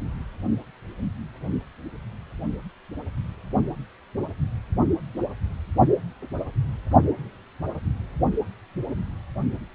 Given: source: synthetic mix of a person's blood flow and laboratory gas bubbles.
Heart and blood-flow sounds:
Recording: Doppler ultrasound of blood flow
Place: precordium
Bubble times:
no bubbles
From the record:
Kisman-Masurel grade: 000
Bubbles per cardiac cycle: 0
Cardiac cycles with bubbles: 0%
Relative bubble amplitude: no bubbles discernible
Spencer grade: 0 (complete lack of bubble signals)

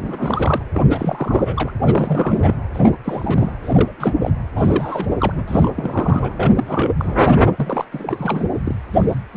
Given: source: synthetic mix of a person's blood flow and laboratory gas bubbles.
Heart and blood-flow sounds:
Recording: Doppler ultrasound of blood flow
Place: precordium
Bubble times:
0.00-0.62 s: bubbles
0.73-0.85 s: bubbles
0.89-1.71 s: bubbles
1.80-2.54 s: bubbles
2.73-2.94 s: bubbles
3.04-3.52 s: bubbles
3.62-3.91 s: bubbles
3.99-4.12 s: bubbles
4.21-4.32 s: bubbles
4.55-5.07 s: bubbles
5.20-5.33 s: bubbles
5.36-5.45 s: bubbles
5.48-6.33 s: bubbles
6.37-6.52 s: bubbles
6.55-6.93 s: bubbles
6.99-7.15 s: bubbles
7.56-7.85 s: bubbles
7.92-8.46 s: bubbles
8.64-8.75 s: bubbles
8.92-9.15 s: bubbles
9.34-9.37 s: bubbles
From the record:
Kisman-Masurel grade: 342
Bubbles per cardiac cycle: rolling drumbeat, 9 or more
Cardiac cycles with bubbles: 100%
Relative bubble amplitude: moderate (0.250 to 0.450)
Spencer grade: 3 (all of the cardiac periods contain showers or single bubble signals, but not dominating or overriding the cardiac motion signals)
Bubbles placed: anywhere in the cardiac cycle

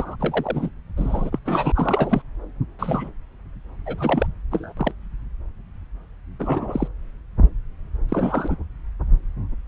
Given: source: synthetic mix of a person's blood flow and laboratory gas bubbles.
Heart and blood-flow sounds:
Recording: Doppler ultrasound of blood flow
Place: subclavian vein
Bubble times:
0.00-0.16 s: bubbles
0.20-0.70 s: bubbles
0.96-1.39 s: bubbles
1.45-1.72 s: bubbles
1.75-2.22 s: bubbles
2.79-3.10 s: bubbles
3.86-4.27 s: bubbles
4.50-4.72 s: bubbles
4.77-4.92 s: bubbles
6.39-6.88 s: bubbles
8.09-8.56 s: bubbles
From the record:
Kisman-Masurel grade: 232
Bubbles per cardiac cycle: several, 3 to 8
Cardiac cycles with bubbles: 50 to 99%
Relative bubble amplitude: moderate (0.250 to 0.450)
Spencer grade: 3 (all of the cardiac periods contain showers or single bubble signals, but not dominating or overriding the cardiac motion signals)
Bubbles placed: anywhere in the cardiac cycle

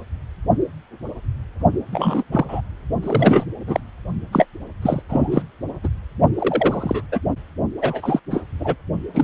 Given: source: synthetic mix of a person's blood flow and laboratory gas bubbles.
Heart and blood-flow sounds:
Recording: Doppler ultrasound of blood flow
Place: precordium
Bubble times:
1.91-2.24 s: bubbles
2.32-2.46 s: bubbles
2.49-2.61 s: bubbles
3.02-3.47 s: bubbles
3.67-3.80 s: bubbles
4.32-4.46 s: bubbles
4.82-5.02 s: bubbles
5.08-5.42 s: bubbles
5.83-5.89 s: bubbles
6.35-7.02 s: bubbles
7.12-7.20 s: bubbles
7.81-8.20 s: bubbles
8.30-8.42 s: bubbles
8.59-8.75 s: bubbles
9.13-9.24 s: bubbles
From the record:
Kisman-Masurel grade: 233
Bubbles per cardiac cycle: several, 3 to 8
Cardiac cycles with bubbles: 50 to 99%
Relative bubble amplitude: loud (0.450 to 0.775)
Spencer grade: 3 (all of the cardiac periods contain showers or single bubble signals, but not dominating or overriding the cardiac motion signals)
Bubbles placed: only in the low amplitude regions of the cardiac cycle

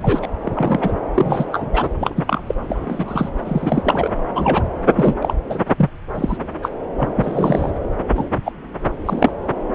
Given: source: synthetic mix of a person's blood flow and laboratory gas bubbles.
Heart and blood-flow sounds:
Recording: Doppler ultrasound of blood flow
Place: subclavian vein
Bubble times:
0.02-0.28 s: bubbles
0.43-0.92 s: bubbles
1.14-1.46 s: bubbles
1.52-1.89 s: bubbles
2.00-2.42 s: bubbles
2.46-2.54 s: bubbles
2.68-3.29 s: bubbles
3.44-4.07 s: bubbles
4.35-4.63 s: bubbles
4.96-5.15 s: bubbles
5.21-5.33 s: bubbles
5.49-5.63 s: bubbles
5.67-5.89 s: bubbles
6.14-6.38 s: bubbles
6.62-6.70 s: bubbles
6.97-7.09 s: bubbles
7.16-7.71 s: bubbles
8.15-8.26 s: bubbles
8.45-8.52 s: bubbles
9.05-9.32 s: bubbles
From the record:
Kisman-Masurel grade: 243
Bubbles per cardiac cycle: several, 3 to 8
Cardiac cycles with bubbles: 100%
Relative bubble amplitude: loud (0.450 to 0.775)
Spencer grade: 3 (all of the cardiac periods contain showers or single bubble signals, but not dominating or overriding the cardiac motion signals)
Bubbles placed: anywhere in the cardiac cycle

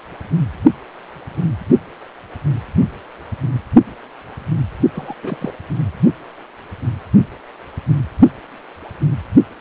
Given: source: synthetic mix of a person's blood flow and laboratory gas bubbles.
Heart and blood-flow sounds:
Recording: Doppler ultrasound of blood flow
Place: precordium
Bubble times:
4.93-5.15 s: bubbles
5.23-5.51 s: bubbles
From the record:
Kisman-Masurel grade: 211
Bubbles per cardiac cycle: several, 3 to 8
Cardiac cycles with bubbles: 1 to 10%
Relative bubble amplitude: barely perceptible (0.100 to 0.250)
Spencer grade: 1 (occasional bubble signal discernible with the cardiac motion signal, with majority of cardiac periods free of bubbles)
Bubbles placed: anywhere in the cardiac cycle

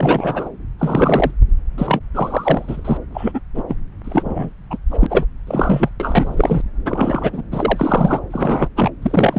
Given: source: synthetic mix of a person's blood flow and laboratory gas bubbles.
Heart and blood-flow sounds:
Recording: Doppler ultrasound of blood flow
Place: subclavian vein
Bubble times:
0.00-0.49 s: bubbles
0.79-1.31 s: bubbles
1.78-2.00 s: bubbles
2.14-2.97 s: bubbles
3.12-3.40 s: bubbles
3.54-3.62 s: bubbles
3.68-3.76 s: bubbles
4.04-4.50 s: bubbles
4.71-4.78 s: bubbles
4.90-5.06 s: bubbles
5.09-5.25 s: bubbles
5.47-5.89 s: bubbles
6.00-6.61 s: bubbles
6.85-7.42 s: bubbles
7.51-8.20 s: bubbles
8.31-8.69 s: bubbles
8.76-8.91 s: bubbles
9.02-9.38 s: bubbles
From the record:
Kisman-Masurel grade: 343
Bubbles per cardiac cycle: rolling drumbeat, 9 or more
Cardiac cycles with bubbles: 100%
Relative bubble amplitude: loud (0.450 to 0.775)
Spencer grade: 3 (all of the cardiac periods contain showers or single bubble signals, but not dominating or overriding the cardiac motion signals)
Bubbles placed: anywhere in the cardiac cycle

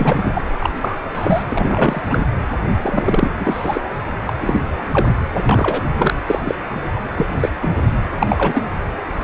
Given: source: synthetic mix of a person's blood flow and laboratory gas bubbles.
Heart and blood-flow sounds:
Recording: Doppler ultrasound of blood flow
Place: precordium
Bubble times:
0.00-0.42 s: bubbles
0.59-0.70 s: bubbles
0.80-0.96 s: bubbles
1.15-1.43 s: bubbles
1.50-2.01 s: bubbles
2.08-2.26 s: bubbles
2.81-3.30 s: bubbles
3.39-3.81 s: bubbles
4.26-4.33 s: bubbles
4.40-4.61 s: bubbles
4.92-5.08 s: bubbles
5.39-5.43 s: bubbles
5.49-5.81 s: bubbles
5.98-6.14 s: bubbles
6.26-6.55 s: bubbles
7.15-7.26 s: bubbles
7.40-7.50 s: bubbles
7.61-7.82 s: bubbles
8.18-8.27 s: bubbles
8.29-8.62 s: bubbles
From the record:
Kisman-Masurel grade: 243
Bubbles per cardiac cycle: several, 3 to 8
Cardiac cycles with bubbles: 100%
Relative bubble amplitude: loud (0.450 to 0.775)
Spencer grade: 3 (all of the cardiac periods contain showers or single bubble signals, but not dominating or overriding the cardiac motion signals)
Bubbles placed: anywhere in the cardiac cycle

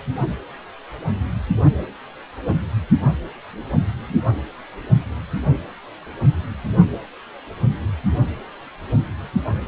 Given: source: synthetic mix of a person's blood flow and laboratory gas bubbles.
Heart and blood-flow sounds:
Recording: Doppler ultrasound of blood flow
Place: precordium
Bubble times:
4.08-4.16 s: bubbles
From the record:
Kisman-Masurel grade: 111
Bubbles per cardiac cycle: 1 to 2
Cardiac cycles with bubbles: 1 to 10%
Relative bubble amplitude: barely perceptible (0.100 to 0.250)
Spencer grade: 1 (occasional bubble signal discernible with the cardiac motion signal, with majority of cardiac periods free of bubbles)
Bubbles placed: anywhere in the cardiac cycle

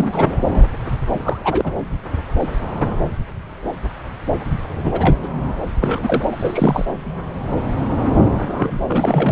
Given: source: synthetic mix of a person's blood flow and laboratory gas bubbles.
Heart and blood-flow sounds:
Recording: Doppler ultrasound of blood flow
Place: subclavian vein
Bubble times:
0.00-0.34 s: bubbles
1.09-1.71 s: bubbles
4.84-5.16 s: bubbles
5.22-5.28 s: bubbles
5.82-6.25 s: bubbles
6.30-6.86 s: bubbles
8.30-8.79 s: bubbles
8.86-9.32 s: bubbles
From the record:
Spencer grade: 3 (all of the cardiac periods contain showers or single bubble signals, but not dominating or overriding the cardiac motion signals)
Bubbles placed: anywhere in the cardiac cycle

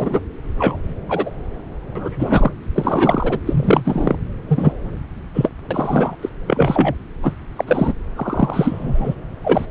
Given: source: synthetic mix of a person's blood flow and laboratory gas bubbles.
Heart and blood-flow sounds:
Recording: Doppler ultrasound of blood flow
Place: subclavian vein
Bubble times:
0.00-0.21 s: bubbles
0.58-0.78 s: bubbles
1.08-1.30 s: bubbles
1.95-2.51 s: bubbles
2.75-3.39 s: bubbles
3.46-4.16 s: bubbles
4.48-4.72 s: bubbles
5.34-5.50 s: bubbles
5.70-6.15 s: bubbles
6.22-6.29 s: bubbles
6.46-6.94 s: bubbles
7.22-7.31 s: bubbles
7.56-7.93 s: bubbles
8.16-9.15 s: bubbles
9.44-9.65 s: bubbles
From the record:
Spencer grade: 3 (all of the cardiac periods contain showers or single bubble signals, but not dominating or overriding the cardiac motion signals)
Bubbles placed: anywhere in the cardiac cycle

